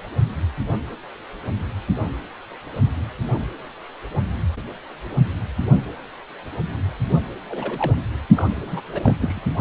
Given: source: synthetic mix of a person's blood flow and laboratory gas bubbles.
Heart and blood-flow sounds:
Doppler ultrasound of blood flow; precordium
7.50-7.95 s: bubbles
8.36-8.52 s: bubbles
8.56-8.81 s: bubbles
8.93-9.16 s: bubbles
9.20-9.39 s: bubbles
From the record:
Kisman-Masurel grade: 221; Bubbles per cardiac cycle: several, 3 to 8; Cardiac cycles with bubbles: 10 to 50%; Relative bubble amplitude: barely perceptible (0.100 to 0.250); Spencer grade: 2 (many but less than half of the cardiac periods contain bubble signals, singularly or in groups); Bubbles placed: only in the low amplitude regions of the cardiac cycle

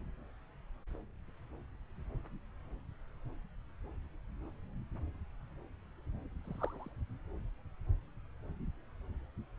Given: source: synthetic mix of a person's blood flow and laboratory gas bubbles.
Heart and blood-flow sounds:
Doppler ultrasound of blood flow; subclavian vein
6.45-6.89 s: bubbles
From the record:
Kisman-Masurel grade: 111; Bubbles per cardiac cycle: 1 to 2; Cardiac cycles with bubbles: 1 to 10%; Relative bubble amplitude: barely perceptible (0.100 to 0.250); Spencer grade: 1 (occasional bubble signal discernible with the cardiac motion signal, with majority of cardiac periods free of bubbles); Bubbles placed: anywhere in the cardiac cycle

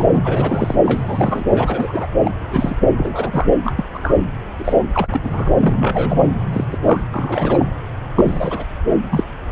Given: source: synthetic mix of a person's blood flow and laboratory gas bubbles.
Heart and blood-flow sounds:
Doppler ultrasound of blood flow; subclavian vein
0.00-0.05 s: bubbles
0.12-0.20 s: bubbles
0.23-0.75 s: bubbles
0.85-1.44 s: bubbles
1.50-2.06 s: bubbles
2.23-2.31 s: bubbles
2.40-2.75 s: bubbles
2.96-3.50 s: bubbles
3.64-3.71 s: bubbles
3.76-3.84 s: bubbles
3.93-4.18 s: bubbles
4.58-4.87 s: bubbles
4.94-5.08 s: bubbles
5.12-5.49 s: bubbles
5.59-6.28 s: bubbles
6.53-6.65 s: bubbles
6.71-6.78 s: bubbles
6.84-7.04 s: bubbles
7.13-7.66 s: bubbles
8.15-8.65 s: bubbles
9.10-9.24 s: bubbles
From the record:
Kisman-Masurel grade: 242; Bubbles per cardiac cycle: several, 3 to 8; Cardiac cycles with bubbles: 100%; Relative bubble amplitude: moderate (0.250 to 0.450); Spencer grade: 3 (all of the cardiac periods contain showers or single bubble signals, but not dominating or overriding the cardiac motion signals); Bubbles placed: anywhere in the cardiac cycle

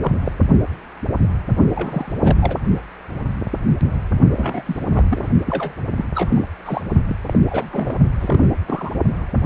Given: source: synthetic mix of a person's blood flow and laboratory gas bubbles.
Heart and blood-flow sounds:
Doppler ultrasound of blood flow; precordium
0.01-0.13 s: bubbles
0.24-0.33 s: bubbles
1.74-2.12 s: bubbles
2.21-2.38 s: bubbles
2.41-2.58 s: bubbles
4.36-4.62 s: bubbles
4.65-4.82 s: bubbles
4.94-5.04 s: bubbles
5.10-5.29 s: bubbles
5.46-5.74 s: bubbles
5.96-6.05 s: bubbles
6.15-6.45 s: bubbles
6.65-6.82 s: bubbles
7.07-7.16 s: bubbles
7.26-7.39 s: bubbles
7.47-7.96 s: bubbles
8.20-8.53 s: bubbles
8.68-8.90 s: bubbles
From the record:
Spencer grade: 3 (all of the cardiac periods contain showers or single bubble signals, but not dominating or overriding the cardiac motion signals); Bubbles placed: only in the low amplitude regions of the cardiac cycle

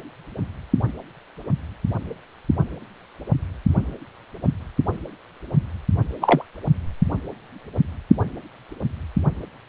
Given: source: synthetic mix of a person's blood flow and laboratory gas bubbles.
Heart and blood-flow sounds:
Doppler ultrasound of blood flow; precordium
6.21-6.44 s: bubbles
From the record:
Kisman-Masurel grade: 113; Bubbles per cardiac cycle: 1 to 2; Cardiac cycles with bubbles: 1 to 10%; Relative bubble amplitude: loud (0.450 to 0.775); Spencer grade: 1 (occasional bubble signal discernible with the cardiac motion signal, with majority of cardiac periods free of bubbles); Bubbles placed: only in the low amplitude regions of the cardiac cycle

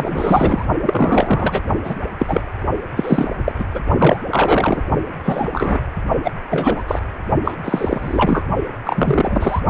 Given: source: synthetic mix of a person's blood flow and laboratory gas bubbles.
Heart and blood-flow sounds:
Doppler ultrasound of blood flow; precordium
0.00-0.66 s: bubbles
0.83-1.62 s: bubbles
1.84-1.95 s: bubbles
2.19-2.41 s: bubbles
2.96-3.29 s: bubbles
3.44-3.52 s: bubbles
3.59-3.65 s: bubbles
3.74-3.80 s: bubbles
3.98-4.19 s: bubbles
4.31-4.81 s: bubbles
5.23-5.49 s: bubbles
5.53-5.79 s: bubbles
6.24-6.31 s: bubbles
6.50-6.83 s: bubbles
6.88-6.99 s: bubbles
7.44-7.55 s: bubbles
7.64-8.45 s: bubbles
8.85-9.62 s: bubbles
From the record:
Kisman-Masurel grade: 243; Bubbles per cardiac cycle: several, 3 to 8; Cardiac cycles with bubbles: 100%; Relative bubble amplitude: loud (0.450 to 0.775); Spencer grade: 3 (all of the cardiac periods contain showers or single bubble signals, but not dominating or overriding the cardiac motion signals); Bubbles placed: only in the low amplitude regions of the cardiac cycle

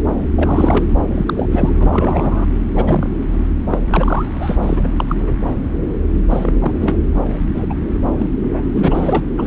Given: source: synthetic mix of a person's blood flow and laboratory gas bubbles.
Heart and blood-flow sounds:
Doppler ultrasound of blood flow; subclavian vein
0.35-0.86 s: bubbles
1.14-1.33 s: bubbles
1.36-1.70 s: bubbles
1.80-2.47 s: bubbles
2.69-3.12 s: bubbles
3.29-3.38 s: bubbles
3.71-3.79 s: bubbles
3.90-4.58 s: bubbles
4.61-4.88 s: bubbles
4.96-5.06 s: bubbles
5.08-5.17 s: bubbles
5.26-5.32 s: bubbles
6.30-6.53 s: bubbles
6.60-6.99 s: bubbles
7.54-7.66 s: bubbles
7.69-7.75 s: bubbles
8.04-8.12 s: bubbles
8.18-8.26 s: bubbles
8.52-8.62 s: bubbles
8.73-9.24 s: bubbles
9.37-9.47 s: bubbles
From the record:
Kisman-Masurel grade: 243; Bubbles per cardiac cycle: several, 3 to 8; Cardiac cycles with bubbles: 100%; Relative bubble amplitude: loud (0.450 to 0.775); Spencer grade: 3 (all of the cardiac periods contain showers or single bubble signals, but not dominating or overriding the cardiac motion signals); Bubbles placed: anywhere in the cardiac cycle

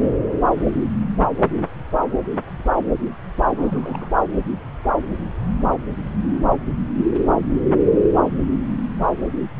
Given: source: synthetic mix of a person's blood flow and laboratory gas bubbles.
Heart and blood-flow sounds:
Doppler ultrasound of blood flow; subclavian vein
3.56-4.16 s: bubbles
From the record:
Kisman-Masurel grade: 211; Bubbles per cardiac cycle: several, 3 to 8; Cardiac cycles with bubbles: 1 to 10%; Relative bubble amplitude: barely perceptible (0.100 to 0.250); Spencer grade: 1 (occasional bubble signal discernible with the cardiac motion signal, with majority of cardiac periods free of bubbles); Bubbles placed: anywhere in the cardiac cycle

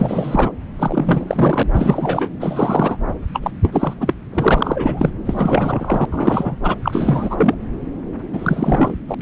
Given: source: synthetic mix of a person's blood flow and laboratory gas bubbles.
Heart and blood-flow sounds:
Doppler ultrasound of blood flow; subclavian vein
0.00-0.52 s: bubbles
0.79-1.63 s: bubbles
1.74-2.29 s: bubbles
2.40-2.97 s: bubbles
3.33-3.51 s: bubbles
3.62-4.13 s: bubbles
4.33-5.10 s: bubbles
5.25-6.05 s: bubbles
6.11-6.75 s: bubbles
6.82-7.54 s: bubbles
8.33-8.96 s: bubbles
9.08-9.15 s: bubbles
9.19-9.22 s: bubbles
From the record:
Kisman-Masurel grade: 343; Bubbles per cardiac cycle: rolling drumbeat, 9 or more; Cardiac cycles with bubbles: 100%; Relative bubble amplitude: loud (0.450 to 0.775); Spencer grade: 3 (all of the cardiac periods contain showers or single bubble signals, but not dominating or overriding the cardiac motion signals); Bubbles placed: anywhere in the cardiac cycle

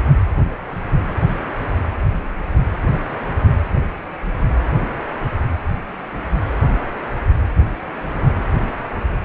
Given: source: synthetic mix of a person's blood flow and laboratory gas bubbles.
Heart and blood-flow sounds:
Doppler ultrasound of blood flow; precordium
no bubbles
From the record:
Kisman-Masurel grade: 000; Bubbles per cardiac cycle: 0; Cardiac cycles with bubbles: 0%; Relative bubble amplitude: no bubbles discernible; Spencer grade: 0 (complete lack of bubble signals)

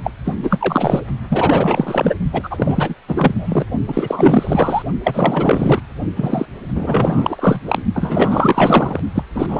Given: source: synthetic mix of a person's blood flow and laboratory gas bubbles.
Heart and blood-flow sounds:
Doppler ultrasound of blood flow; precordium
0.04-0.11 s: bubbles
0.24-0.35 s: bubbles
0.43-1.02 s: bubbles
1.28-2.14 s: bubbles
2.33-2.95 s: bubbles
3.08-3.65 s: bubbles
3.88-4.83 s: bubbles
5.04-5.81 s: bubbles
6.16-6.46 s: bubbles
6.75-7.60 s: bubbles
7.66-7.82 s: bubbles
7.94-8.99 s: bubbles
9.15-9.23 s: bubbles
9.35-9.60 s: bubbles
From the record:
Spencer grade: 4 (maximum detectable bubble signal sounding continuously throughout systole and diastole of every cardiac period, and overriding the amplitude of the normal cardiac signals); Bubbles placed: only in the low amplitude regions of the cardiac cycle

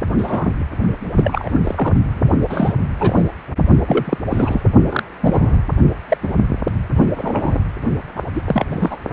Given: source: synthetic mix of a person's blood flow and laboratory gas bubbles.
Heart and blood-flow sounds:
Doppler ultrasound of blood flow; precordium
0.18-0.52 s: bubbles
1.16-1.49 s: bubbles
1.64-1.93 s: bubbles
2.50-2.73 s: bubbles
2.98-3.23 s: bubbles
3.88-4.17 s: bubbles
4.31-4.64 s: bubbles
4.89-5.03 s: bubbles
5.21-5.63 s: bubbles
6.08-6.17 s: bubbles
6.22-6.35 s: bubbles
6.95-7.06 s: bubbles
7.15-7.59 s: bubbles
8.16-8.21 s: bubbles
8.35-8.42 s: bubbles
8.46-8.66 s: bubbles
8.71-8.96 s: bubbles
From the record:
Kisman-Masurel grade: 242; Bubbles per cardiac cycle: several, 3 to 8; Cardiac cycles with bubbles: 100%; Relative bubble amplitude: moderate (0.250 to 0.450); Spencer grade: 3 (all of the cardiac periods contain showers or single bubble signals, but not dominating or overriding the cardiac motion signals); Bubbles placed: only in the low amplitude regions of the cardiac cycle

